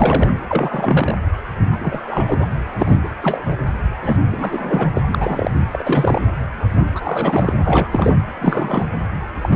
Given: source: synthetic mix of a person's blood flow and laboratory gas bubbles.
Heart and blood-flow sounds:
Doppler ultrasound of blood flow; precordium
0.00-0.33 s: bubbles
0.49-1.16 s: bubbles
1.72-2.48 s: bubbles
2.79-2.98 s: bubbles
3.04-3.09 s: bubbles
3.21-3.57 s: bubbles
4.04-4.17 s: bubbles
4.30-4.89 s: bubbles
4.93-5.01 s: bubbles
5.08-5.51 s: bubbles
5.71-6.21 s: bubbles
6.95-7.53 s: bubbles
7.64-7.88 s: bubbles
7.92-8.15 s: bubbles
8.36-8.88 s: bubbles
9.43-9.56 s: bubbles
From the record:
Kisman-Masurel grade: 332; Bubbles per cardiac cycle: rolling drumbeat, 9 or more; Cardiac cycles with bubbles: 50 to 99%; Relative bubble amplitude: moderate (0.250 to 0.450); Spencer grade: 3 (all of the cardiac periods contain showers or single bubble signals, but not dominating or overriding the cardiac motion signals); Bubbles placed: anywhere in the cardiac cycle

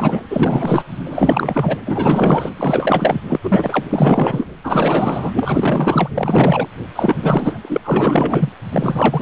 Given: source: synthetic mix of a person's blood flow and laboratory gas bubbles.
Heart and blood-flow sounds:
Doppler ultrasound of blood flow; precordium
0.00-0.22 s: bubbles
0.30-0.83 s: bubbles
1.09-1.79 s: bubbles
1.85-2.50 s: bubbles
2.56-3.21 s: bubbles
3.28-3.40 s: bubbles
3.43-3.87 s: bubbles
3.89-4.47 s: bubbles
4.63-5.31 s: bubbles
5.35-6.08 s: bubbles
6.14-6.67 s: bubbles
6.96-7.78 s: bubbles
7.84-8.49 s: bubbles
8.71-9.22 s: bubbles
From the record:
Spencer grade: 4 (maximum detectable bubble signal sounding continuously throughout systole and diastole of every cardiac period, and overriding the amplitude of the normal cardiac signals); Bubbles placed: anywhere in the cardiac cycle

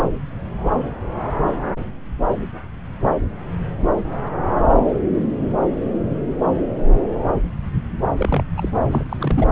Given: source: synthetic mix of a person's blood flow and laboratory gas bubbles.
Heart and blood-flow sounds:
Doppler ultrasound of blood flow; subclavian vein
8.18-8.43 s: bubbles
8.57-8.69 s: bubbles
8.91-9.03 s: bubbles
9.09-9.52 s: bubbles
From the record:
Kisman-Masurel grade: 222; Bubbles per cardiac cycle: several, 3 to 8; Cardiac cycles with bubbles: 10 to 50%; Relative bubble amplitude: moderate (0.250 to 0.450); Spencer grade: 2 (many but less than half of the cardiac periods contain bubble signals, singularly or in groups); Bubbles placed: anywhere in the cardiac cycle

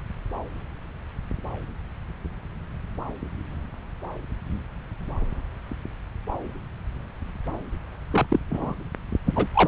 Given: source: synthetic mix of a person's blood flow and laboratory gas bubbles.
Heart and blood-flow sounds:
Doppler ultrasound of blood flow; subclavian vein
8.11-8.39 s: bubbles
8.50-8.74 s: bubbles
9.26-9.46 s: bubbles
9.54-9.68 s: bubbles
From the record:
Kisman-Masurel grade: 212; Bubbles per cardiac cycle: several, 3 to 8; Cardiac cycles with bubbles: 1 to 10%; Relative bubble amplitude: moderate (0.250 to 0.450); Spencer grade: 1 (occasional bubble signal discernible with the cardiac motion signal, with majority of cardiac periods free of bubbles); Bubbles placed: anywhere in the cardiac cycle

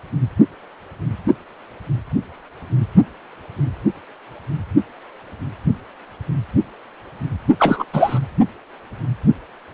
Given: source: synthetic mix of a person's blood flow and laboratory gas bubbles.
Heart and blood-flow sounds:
Doppler ultrasound of blood flow; precordium
7.58-7.84 s: bubbles
7.93-8.20 s: bubbles
From the record:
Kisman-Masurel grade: 213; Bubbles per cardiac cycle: several, 3 to 8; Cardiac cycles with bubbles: 1 to 10%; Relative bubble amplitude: loud (0.450 to 0.775); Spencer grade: 1 (occasional bubble signal discernible with the cardiac motion signal, with majority of cardiac periods free of bubbles); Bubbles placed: only in the low amplitude regions of the cardiac cycle

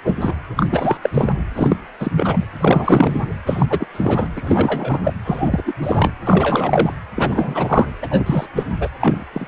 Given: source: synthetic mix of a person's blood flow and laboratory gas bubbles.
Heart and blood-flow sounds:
Doppler ultrasound of blood flow; precordium
0.04-0.14 s: bubbles
0.21-0.34 s: bubbles
0.57-0.67 s: bubbles
0.70-0.97 s: bubbles
1.02-1.10 s: bubbles
1.14-1.33 s: bubbles
1.54-1.77 s: bubbles
1.99-2.11 s: bubbles
2.17-2.45 s: bubbles
2.60-3.29 s: bubbles
3.46-3.66 s: bubbles
3.69-3.86 s: bubbles
3.93-4.28 s: bubbles
4.35-4.99 s: bubbles
5.03-5.13 s: bubbles
5.25-5.74 s: bubbles
5.81-6.12 s: bubbles
6.25-6.94 s: bubbles
7.16-7.93 s: bubbles
8.02-8.07 s: bubbles
8.10-8.46 s: bubbles
8.55-8.63 s: bubbles
8.80-8.89 s: bubbles
9.00-9.25 s: bubbles
9.33-9.48 s: bubbles
From the record:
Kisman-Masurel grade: 343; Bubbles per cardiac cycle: rolling drumbeat, 9 or more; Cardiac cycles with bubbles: 100%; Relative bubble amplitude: loud (0.450 to 0.775); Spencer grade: 3 (all of the cardiac periods contain showers or single bubble signals, but not dominating or overriding the cardiac motion signals); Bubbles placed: anywhere in the cardiac cycle

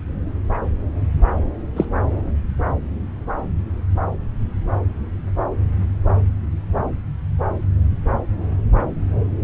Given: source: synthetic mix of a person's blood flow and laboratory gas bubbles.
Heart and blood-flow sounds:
Doppler ultrasound of blood flow; subclavian vein
1.76-1.85 s: bubbles
From the record:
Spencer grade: 1 (occasional bubble signal discernible with the cardiac motion signal, with majority of cardiac periods free of bubbles); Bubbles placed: anywhere in the cardiac cycle

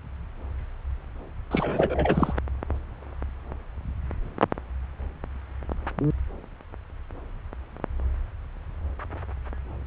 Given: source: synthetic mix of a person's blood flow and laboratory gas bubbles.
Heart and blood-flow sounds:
Doppler ultrasound of blood flow; subclavian vein
1.51-2.33 s: bubbles
From the record:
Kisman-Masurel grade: 212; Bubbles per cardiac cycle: several, 3 to 8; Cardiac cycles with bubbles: 1 to 10%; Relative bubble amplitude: moderate (0.250 to 0.450); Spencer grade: 1 (occasional bubble signal discernible with the cardiac motion signal, with majority of cardiac periods free of bubbles); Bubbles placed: anywhere in the cardiac cycle

